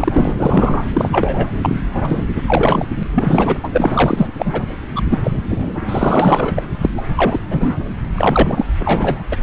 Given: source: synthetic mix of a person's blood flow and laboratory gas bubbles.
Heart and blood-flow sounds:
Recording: Doppler ultrasound of blood flow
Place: subclavian vein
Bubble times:
0.00-0.33 s: bubbles
0.36-0.86 s: bubbles
0.93-1.49 s: bubbles
1.61-2.24 s: bubbles
2.36-2.42 s: bubbles
2.46-2.86 s: bubbles
2.98-3.04 s: bubbles
3.15-3.58 s: bubbles
3.63-3.69 s: bubbles
3.73-4.27 s: bubbles
4.37-4.62 s: bubbles
4.95-5.02 s: bubbles
5.10-5.20 s: bubbles
5.23-5.32 s: bubbles
5.50-5.75 s: bubbles
5.88-6.52 s: bubbles
6.57-6.63 s: bubbles
6.81-6.90 s: bubbles
6.97-7.03 s: bubbles
7.16-7.40 s: bubbles
7.50-7.75 s: bubbles
8.15-8.66 s: bubbles
8.79-9.23 s: bubbles
9.31-9.37 s: bubbles
From the record:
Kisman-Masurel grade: 243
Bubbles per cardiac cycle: several, 3 to 8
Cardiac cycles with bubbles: 100%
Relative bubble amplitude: loud (0.450 to 0.775)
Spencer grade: 3 (all of the cardiac periods contain showers or single bubble signals, but not dominating or overriding the cardiac motion signals)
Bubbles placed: anywhere in the cardiac cycle

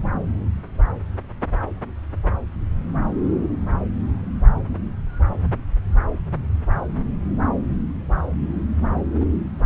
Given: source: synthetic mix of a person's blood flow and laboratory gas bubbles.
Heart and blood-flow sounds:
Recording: Doppler ultrasound of blood flow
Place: subclavian vein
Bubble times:
9.20-9.25 s: bubbles
From the record:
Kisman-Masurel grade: 113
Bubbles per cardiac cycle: 1 to 2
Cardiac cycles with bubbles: 1 to 10%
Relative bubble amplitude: loud (0.450 to 0.775)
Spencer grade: 1 (occasional bubble signal discernible with the cardiac motion signal, with majority of cardiac periods free of bubbles)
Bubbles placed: anywhere in the cardiac cycle

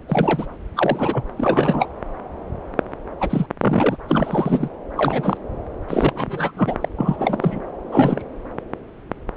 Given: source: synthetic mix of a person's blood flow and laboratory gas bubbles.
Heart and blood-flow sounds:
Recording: Doppler ultrasound of blood flow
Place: subclavian vein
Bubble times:
0.08-0.46 s: bubbles
0.75-1.24 s: bubbles
1.37-1.87 s: bubbles
3.20-3.46 s: bubbles
3.62-3.97 s: bubbles
4.08-4.69 s: bubbles
4.97-5.37 s: bubbles
5.89-6.52 s: bubbles
6.56-6.75 s: bubbles
6.81-6.89 s: bubbles
6.98-7.59 s: bubbles
7.92-8.22 s: bubbles
From the record:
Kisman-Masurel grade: 232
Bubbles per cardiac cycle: several, 3 to 8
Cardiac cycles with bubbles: 50 to 99%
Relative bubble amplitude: moderate (0.250 to 0.450)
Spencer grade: 3 (all of the cardiac periods contain showers or single bubble signals, but not dominating or overriding the cardiac motion signals)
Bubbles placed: anywhere in the cardiac cycle

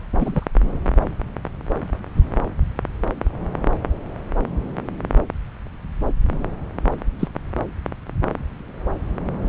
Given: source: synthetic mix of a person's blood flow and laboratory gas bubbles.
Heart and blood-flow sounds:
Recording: Doppler ultrasound of blood flow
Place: subclavian vein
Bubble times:
0.20-0.45 s: bubbles
7.19-7.28 s: bubbles
From the record:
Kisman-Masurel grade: 123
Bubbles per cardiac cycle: 1 to 2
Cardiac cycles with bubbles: 10 to 50%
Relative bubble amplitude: loud (0.450 to 0.775)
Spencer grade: 2 (many but less than half of the cardiac periods contain bubble signals, singularly or in groups)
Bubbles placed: anywhere in the cardiac cycle

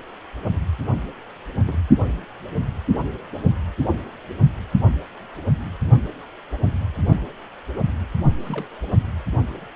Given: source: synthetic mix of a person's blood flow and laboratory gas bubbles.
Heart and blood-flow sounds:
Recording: Doppler ultrasound of blood flow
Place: precordium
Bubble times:
1.67-1.77 s: bubbles
8.39-8.67 s: bubbles
From the record:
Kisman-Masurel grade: 121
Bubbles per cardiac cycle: 1 to 2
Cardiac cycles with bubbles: 10 to 50%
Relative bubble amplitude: barely perceptible (0.100 to 0.250)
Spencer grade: 2 (many but less than half of the cardiac periods contain bubble signals, singularly or in groups)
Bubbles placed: only in the low amplitude regions of the cardiac cycle

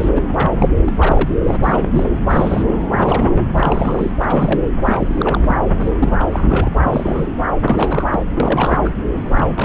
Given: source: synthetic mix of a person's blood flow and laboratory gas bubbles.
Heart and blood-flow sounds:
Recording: Doppler ultrasound of blood flow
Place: subclavian vein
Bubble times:
0.00-0.10 s: bubbles
0.15-0.22 s: bubbles
0.36-0.51 s: bubbles
0.58-0.70 s: bubbles
0.84-0.93 s: bubbles
0.97-1.34 s: bubbles
1.44-1.56 s: bubbles
1.63-2.08 s: bubbles
2.29-2.63 s: bubbles
2.66-2.75 s: bubbles
2.90-3.44 s: bubbles
3.52-4.11 s: bubbles
4.20-4.68 s: bubbles
4.83-5.56 s: bubbles
5.80-5.92 s: bubbles
6.00-6.69 s: bubbles
6.82-7.27 s: bubbles
7.64-8.20 s: bubbles
8.40-8.91 s: bubbles
9.16-9.65 s: bubbles
From the record:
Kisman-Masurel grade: 342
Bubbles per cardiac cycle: rolling drumbeat, 9 or more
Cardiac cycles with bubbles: 100%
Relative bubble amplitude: moderate (0.250 to 0.450)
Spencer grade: 3 (all of the cardiac periods contain showers or single bubble signals, but not dominating or overriding the cardiac motion signals)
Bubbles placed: anywhere in the cardiac cycle

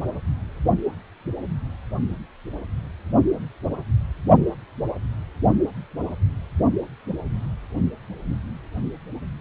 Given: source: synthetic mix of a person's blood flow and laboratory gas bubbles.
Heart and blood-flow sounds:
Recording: Doppler ultrasound of blood flow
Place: precordium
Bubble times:
no bubbles
From the record:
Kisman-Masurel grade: 000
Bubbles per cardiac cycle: 0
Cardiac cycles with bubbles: 0%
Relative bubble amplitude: no bubbles discernible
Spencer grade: 0 (complete lack of bubble signals)

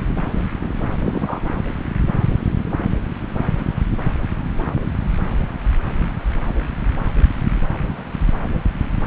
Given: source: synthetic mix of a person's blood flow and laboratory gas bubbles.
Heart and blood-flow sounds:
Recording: Doppler ultrasound of blood flow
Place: subclavian vein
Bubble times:
1.04-1.40 s: bubbles
From the record:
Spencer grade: 1 (occasional bubble signal discernible with the cardiac motion signal, with majority of cardiac periods free of bubbles)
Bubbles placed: anywhere in the cardiac cycle

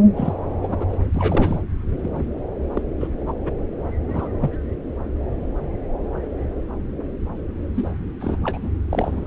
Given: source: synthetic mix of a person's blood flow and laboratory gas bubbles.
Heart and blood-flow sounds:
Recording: Doppler ultrasound of blood flow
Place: subclavian vein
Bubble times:
0.16-0.34 s: bubbles
0.61-0.85 s: bubbles
0.89-0.97 s: bubbles
1.15-1.61 s: bubbles
2.02-2.10 s: bubbles
2.14-2.24 s: bubbles
2.73-2.83 s: bubbles
3.00-3.08 s: bubbles
3.27-3.32 s: bubbles
3.44-3.51 s: bubbles
4.08-4.29 s: bubbles
4.41-4.58 s: bubbles
7.74-7.91 s: bubbles
8.20-8.37 s: bubbles
8.44-8.71 s: bubbles
8.90-9.27 s: bubbles
From the record:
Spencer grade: 3 (all of the cardiac periods contain showers or single bubble signals, but not dominating or overriding the cardiac motion signals)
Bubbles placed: anywhere in the cardiac cycle

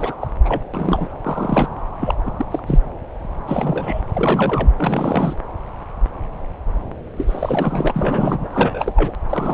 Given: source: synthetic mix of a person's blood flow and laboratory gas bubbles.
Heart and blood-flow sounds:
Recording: Doppler ultrasound of blood flow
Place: subclavian vein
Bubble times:
0.00-0.15 s: bubbles
0.22-0.28 s: bubbles
0.45-0.62 s: bubbles
0.74-1.09 s: bubbles
1.22-1.70 s: bubbles
2.00-2.15 s: bubbles
2.25-2.31 s: bubbles
2.37-2.46 s: bubbles
2.50-2.63 s: bubbles
2.67-2.79 s: bubbles
3.47-4.02 s: bubbles
4.13-4.74 s: bubbles
4.77-5.36 s: bubbles
7.16-8.49 s: bubbles
8.53-9.13 s: bubbles
9.29-9.54 s: bubbles
From the record:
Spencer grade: 3 (all of the cardiac periods contain showers or single bubble signals, but not dominating or overriding the cardiac motion signals)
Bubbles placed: anywhere in the cardiac cycle

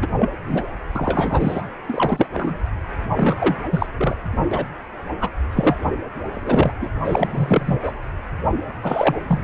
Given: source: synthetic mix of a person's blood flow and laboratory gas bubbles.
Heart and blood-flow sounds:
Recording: Doppler ultrasound of blood flow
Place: precordium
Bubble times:
0.02-0.08 s: bubbles
0.19-0.31 s: bubbles
0.45-0.62 s: bubbles
0.95-1.62 s: bubbles
1.88-2.27 s: bubbles
2.33-2.58 s: bubbles
3.15-3.35 s: bubbles
3.39-3.56 s: bubbles
3.70-3.86 s: bubbles
3.98-4.16 s: bubbles
4.51-4.65 s: bubbles
5.21-5.29 s: bubbles
5.51-5.87 s: bubbles
6.32-6.72 s: bubbles
6.80-6.89 s: bubbles
7.04-7.79 s: bubbles
7.82-7.92 s: bubbles
8.83-9.23 s: bubbles
9.28-9.44 s: bubbles
From the record:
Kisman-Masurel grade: 243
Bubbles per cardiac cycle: several, 3 to 8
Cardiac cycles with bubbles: 100%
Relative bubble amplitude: loud (0.450 to 0.775)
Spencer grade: 3 (all of the cardiac periods contain showers or single bubble signals, but not dominating or overriding the cardiac motion signals)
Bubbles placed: anywhere in the cardiac cycle

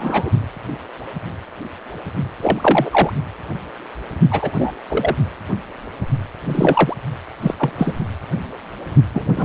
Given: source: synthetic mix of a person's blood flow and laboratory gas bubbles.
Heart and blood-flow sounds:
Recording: Doppler ultrasound of blood flow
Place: precordium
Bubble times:
0.00-0.32 s: bubbles
2.42-3.10 s: bubbles
4.31-4.54 s: bubbles
4.57-4.74 s: bubbles
4.88-5.17 s: bubbles
6.45-6.96 s: bubbles
7.41-7.54 s: bubbles
7.59-7.70 s: bubbles
7.78-7.93 s: bubbles
9.14-9.31 s: bubbles
9.36-9.45 s: bubbles
From the record:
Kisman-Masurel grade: 233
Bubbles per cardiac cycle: several, 3 to 8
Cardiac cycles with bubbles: 50 to 99%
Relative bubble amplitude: loud (0.450 to 0.775)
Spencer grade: 3 (all of the cardiac periods contain showers or single bubble signals, but not dominating or overriding the cardiac motion signals)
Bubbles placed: only in the low amplitude regions of the cardiac cycle

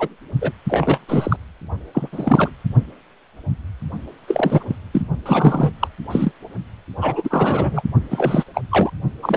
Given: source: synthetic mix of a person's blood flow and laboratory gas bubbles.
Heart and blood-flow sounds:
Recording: Doppler ultrasound of blood flow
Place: precordium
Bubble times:
0.00-0.09 s: bubbles
0.41-0.51 s: bubbles
0.68-1.00 s: bubbles
1.08-1.36 s: bubbles
1.94-2.08 s: bubbles
2.12-2.51 s: bubbles
4.27-4.63 s: bubbles
4.67-4.76 s: bubbles
4.92-5.02 s: bubbles
5.25-5.72 s: bubbles
5.79-5.88 s: bubbles
6.10-6.31 s: bubbles
6.97-7.82 s: bubbles
8.11-8.44 s: bubbles
8.54-8.62 s: bubbles
8.71-8.90 s: bubbles
9.22-9.37 s: bubbles
From the record:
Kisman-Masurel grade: 333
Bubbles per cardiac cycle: rolling drumbeat, 9 or more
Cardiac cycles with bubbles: 50 to 99%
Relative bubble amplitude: loud (0.450 to 0.775)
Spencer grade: 3 (all of the cardiac periods contain showers or single bubble signals, but not dominating or overriding the cardiac motion signals)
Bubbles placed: only in the low amplitude regions of the cardiac cycle

